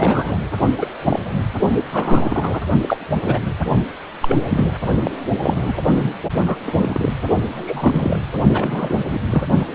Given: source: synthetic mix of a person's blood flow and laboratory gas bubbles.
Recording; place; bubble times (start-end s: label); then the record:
Doppler ultrasound of blood flow; precordium
0.00-0.39 s: bubbles
0.78-0.86 s: bubbles
1.05-1.20 s: bubbles
1.92-2.60 s: bubbles
2.81-2.98 s: bubbles
3.21-3.45 s: bubbles
4.22-4.36 s: bubbles
4.49-4.71 s: bubbles
5.04-5.11 s: bubbles
5.42-5.74 s: bubbles
5.77-5.81 s: bubbles
5.92-6.13 s: bubbles
6.46-6.57 s: bubbles
6.64-7.13 s: bubbles
7.54-8.18 s: bubbles
8.54-9.05 s: bubbles
9.10-9.18 s: bubbles
9.30-9.46 s: bubbles
From the record:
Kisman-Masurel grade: 232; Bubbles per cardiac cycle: several, 3 to 8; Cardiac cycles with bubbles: 50 to 99%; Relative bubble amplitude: moderate (0.250 to 0.450); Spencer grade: 3 (all of the cardiac periods contain showers or single bubble signals, but not dominating or overriding the cardiac motion signals); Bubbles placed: only in the low amplitude regions of the cardiac cycle